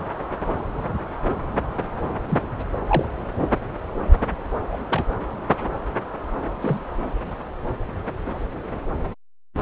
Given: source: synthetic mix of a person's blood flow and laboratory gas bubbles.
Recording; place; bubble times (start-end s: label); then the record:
Doppler ultrasound of blood flow; subclavian vein
2.27-2.45 s: bubbles
2.88-3.05 s: bubbles
4.71-4.78 s: bubbles
4.90-5.05 s: bubbles
6.62-6.81 s: bubbles
From the record:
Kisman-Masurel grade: 122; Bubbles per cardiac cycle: 1 to 2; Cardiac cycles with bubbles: 10 to 50%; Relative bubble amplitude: moderate (0.250 to 0.450); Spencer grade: 2 (many but less than half of the cardiac periods contain bubble signals, singularly or in groups); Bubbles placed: anywhere in the cardiac cycle